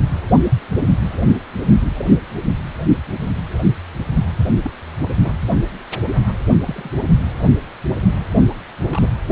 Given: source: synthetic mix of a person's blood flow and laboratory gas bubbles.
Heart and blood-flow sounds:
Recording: Doppler ultrasound of blood flow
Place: precordium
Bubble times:
1.96-2.05 s: bubbles
4.62-4.71 s: bubbles
5.21-5.33 s: bubbles
6.65-6.90 s: bubbles
8.89-9.09 s: bubbles
From the record:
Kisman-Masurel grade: 121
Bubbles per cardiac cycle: 1 to 2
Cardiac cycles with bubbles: 10 to 50%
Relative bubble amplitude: barely perceptible (0.100 to 0.250)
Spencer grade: 2 (many but less than half of the cardiac periods contain bubble signals, singularly or in groups)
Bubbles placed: only in the low amplitude regions of the cardiac cycle

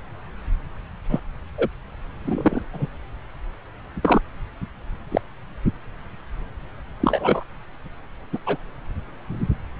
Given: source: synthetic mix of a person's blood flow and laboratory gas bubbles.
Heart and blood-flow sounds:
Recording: Doppler ultrasound of blood flow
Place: subclavian vein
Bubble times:
1.09-1.19 s: bubbles
1.57-1.68 s: bubbles
2.24-2.62 s: bubbles
2.73-2.86 s: bubbles
4.02-4.21 s: bubbles
5.11-5.21 s: bubbles
7.00-7.44 s: bubbles
8.32-8.38 s: bubbles
8.46-8.57 s: bubbles
From the record:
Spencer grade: 2 (many but less than half of the cardiac periods contain bubble signals, singularly or in groups)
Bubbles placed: anywhere in the cardiac cycle

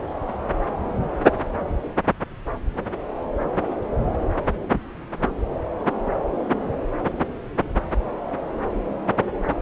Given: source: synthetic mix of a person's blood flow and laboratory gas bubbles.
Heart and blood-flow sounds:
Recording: Doppler ultrasound of blood flow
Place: subclavian vein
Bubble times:
no bubbles
From the record:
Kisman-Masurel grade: 000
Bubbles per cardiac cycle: 0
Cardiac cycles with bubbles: 0%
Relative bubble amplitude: no bubbles discernible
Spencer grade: 0 (complete lack of bubble signals)

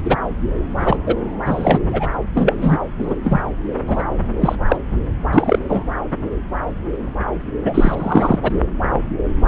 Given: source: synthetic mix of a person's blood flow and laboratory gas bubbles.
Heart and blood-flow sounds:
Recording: Doppler ultrasound of blood flow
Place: subclavian vein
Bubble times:
0.04-0.16 s: bubbles
0.79-0.96 s: bubbles
1.06-1.15 s: bubbles
1.45-1.80 s: bubbles
1.91-2.11 s: bubbles
2.35-2.79 s: bubbles
2.98-3.16 s: bubbles
3.24-3.41 s: bubbles
3.87-4.04 s: bubbles
4.40-4.56 s: bubbles
4.67-4.77 s: bubbles
5.33-5.59 s: bubbles
5.69-5.86 s: bubbles
7.65-8.38 s: bubbles
8.42-8.52 s: bubbles
From the record:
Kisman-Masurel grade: 233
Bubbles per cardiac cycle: several, 3 to 8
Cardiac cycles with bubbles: 50 to 99%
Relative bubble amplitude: loud (0.450 to 0.775)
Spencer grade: 3 (all of the cardiac periods contain showers or single bubble signals, but not dominating or overriding the cardiac motion signals)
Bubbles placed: anywhere in the cardiac cycle

